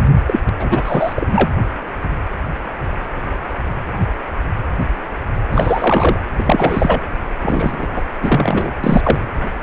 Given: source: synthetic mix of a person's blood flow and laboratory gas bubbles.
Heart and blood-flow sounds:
Doppler ultrasound of blood flow; precordium
0.27-0.39 s: bubbles
0.59-1.13 s: bubbles
1.16-1.50 s: bubbles
5.52-6.20 s: bubbles
6.32-7.02 s: bubbles
7.42-7.87 s: bubbles
7.96-8.02 s: bubbles
8.22-8.73 s: bubbles
8.84-9.21 s: bubbles
From the record:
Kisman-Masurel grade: 333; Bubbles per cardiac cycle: rolling drumbeat, 9 or more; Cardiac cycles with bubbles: 50 to 99%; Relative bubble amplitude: loud (0.450 to 0.775); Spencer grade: 3 (all of the cardiac periods contain showers or single bubble signals, but not dominating or overriding the cardiac motion signals); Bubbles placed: anywhere in the cardiac cycle

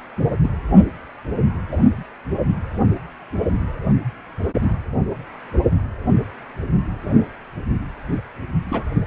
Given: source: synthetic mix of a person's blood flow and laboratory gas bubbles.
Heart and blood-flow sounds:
Doppler ultrasound of blood flow; precordium
0.42-0.49 s: bubbles
1.71-1.77 s: bubbles
8.68-8.84 s: bubbles
From the record:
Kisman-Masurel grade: 121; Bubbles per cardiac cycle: 1 to 2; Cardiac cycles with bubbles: 10 to 50%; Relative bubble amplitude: barely perceptible (0.100 to 0.250); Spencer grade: 2 (many but less than half of the cardiac periods contain bubble signals, singularly or in groups); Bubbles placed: anywhere in the cardiac cycle

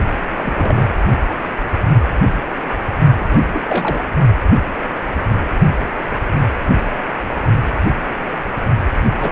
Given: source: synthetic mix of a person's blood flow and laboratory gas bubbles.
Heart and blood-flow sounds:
Doppler ultrasound of blood flow; precordium
0.39-0.95 s: bubbles
3.19-4.02 s: bubbles
9.18-9.32 s: bubbles
From the record:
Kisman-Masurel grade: 221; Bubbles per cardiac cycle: several, 3 to 8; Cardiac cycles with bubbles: 10 to 50%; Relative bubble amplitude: barely perceptible (0.100 to 0.250); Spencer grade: 2 (many but less than half of the cardiac periods contain bubble signals, singularly or in groups); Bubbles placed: only in the low amplitude regions of the cardiac cycle

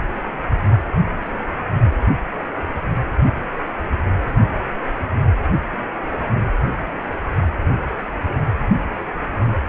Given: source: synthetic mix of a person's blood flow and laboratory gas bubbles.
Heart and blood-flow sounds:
Doppler ultrasound of blood flow; precordium
no bubbles
From the record:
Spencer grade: 0 (complete lack of bubble signals)

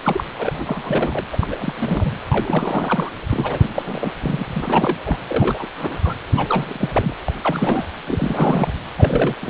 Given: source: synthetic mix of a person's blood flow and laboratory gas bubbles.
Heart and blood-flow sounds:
Doppler ultrasound of blood flow; precordium
0.02-0.24 s: bubbles
0.38-1.25 s: bubbles
1.31-1.38 s: bubbles
1.41-1.56 s: bubbles
1.59-1.73 s: bubbles
1.77-2.13 s: bubbles
2.28-3.11 s: bubbles
3.29-4.12 s: bubbles
4.21-4.45 s: bubbles
4.47-4.96 s: bubbles
5.04-5.18 s: bubbles
5.28-5.66 s: bubbles
5.77-6.14 s: bubbles
6.28-6.91 s: bubbles
6.94-7.16 s: bubbles
7.28-7.32 s: bubbles
7.42-7.84 s: bubbles
8.07-8.72 s: bubbles
8.97-9.35 s: bubbles
9.42-9.50 s: bubbles
From the record:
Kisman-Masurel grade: 342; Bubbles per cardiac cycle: rolling drumbeat, 9 or more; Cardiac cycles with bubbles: 100%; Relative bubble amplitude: moderate (0.250 to 0.450); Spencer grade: 3 (all of the cardiac periods contain showers or single bubble signals, but not dominating or overriding the cardiac motion signals); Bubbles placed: anywhere in the cardiac cycle

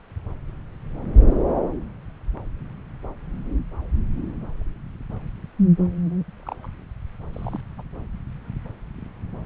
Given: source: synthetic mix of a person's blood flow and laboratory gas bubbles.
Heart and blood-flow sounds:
Doppler ultrasound of blood flow; subclavian vein
6.39-6.70 s: bubbles
7.32-7.60 s: bubbles
7.78-7.82 s: bubbles
From the record:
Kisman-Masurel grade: 121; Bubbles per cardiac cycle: 1 to 2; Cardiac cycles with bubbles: 10 to 50%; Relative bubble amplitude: barely perceptible (0.100 to 0.250); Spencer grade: 2 (many but less than half of the cardiac periods contain bubble signals, singularly or in groups); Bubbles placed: anywhere in the cardiac cycle

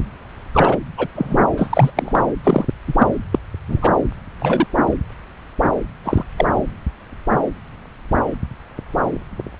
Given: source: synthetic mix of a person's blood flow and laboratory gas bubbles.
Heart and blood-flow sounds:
Doppler ultrasound of blood flow; subclavian vein
0.54-0.77 s: bubbles
0.97-1.08 s: bubbles
1.15-1.40 s: bubbles
1.57-1.91 s: bubbles
1.96-2.22 s: bubbles
2.44-2.66 s: bubbles
2.88-2.94 s: bubbles
2.99-3.07 s: bubbles
3.32-3.39 s: bubbles
3.68-3.98 s: bubbles
4.39-4.67 s: bubbles
6.04-6.23 s: bubbles
6.37-6.46 s: bubbles
From the record:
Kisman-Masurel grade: 233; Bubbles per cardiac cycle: several, 3 to 8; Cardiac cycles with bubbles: 50 to 99%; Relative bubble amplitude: loud (0.450 to 0.775); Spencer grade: 3 (all of the cardiac periods contain showers or single bubble signals, but not dominating or overriding the cardiac motion signals); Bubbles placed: anywhere in the cardiac cycle

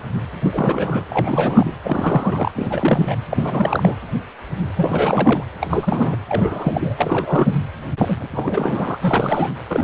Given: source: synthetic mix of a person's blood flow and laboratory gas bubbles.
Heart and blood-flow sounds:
Doppler ultrasound of blood flow; precordium
0.41-1.05 s: bubbles
1.10-1.76 s: bubbles
1.83-2.52 s: bubbles
2.57-3.16 s: bubbles
3.30-3.95 s: bubbles
4.76-5.44 s: bubbles
5.61-6.16 s: bubbles
6.28-6.94 s: bubbles
6.97-7.69 s: bubbles
7.98-8.15 s: bubbles
8.20-8.97 s: bubbles
9.01-9.51 s: bubbles
9.70-9.83 s: bubbles
From the record:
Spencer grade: 3 (all of the cardiac periods contain showers or single bubble signals, but not dominating or overriding the cardiac motion signals); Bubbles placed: anywhere in the cardiac cycle

